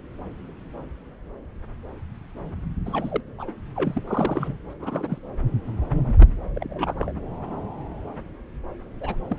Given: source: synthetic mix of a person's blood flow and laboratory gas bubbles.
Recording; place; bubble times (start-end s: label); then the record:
Doppler ultrasound of blood flow; subclavian vein
2.85-3.21 s: bubbles
3.38-3.53 s: bubbles
3.76-4.02 s: bubbles
4.07-4.58 s: bubbles
4.70-4.74 s: bubbles
4.79-5.18 s: bubbles
6.18-6.28 s: bubbles
6.55-7.12 s: bubbles
9.01-9.15 s: bubbles
9.29-9.39 s: bubbles
From the record:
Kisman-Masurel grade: 221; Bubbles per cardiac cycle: several, 3 to 8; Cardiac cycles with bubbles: 10 to 50%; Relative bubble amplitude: barely perceptible (0.100 to 0.250); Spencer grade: 2 (many but less than half of the cardiac periods contain bubble signals, singularly or in groups); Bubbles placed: anywhere in the cardiac cycle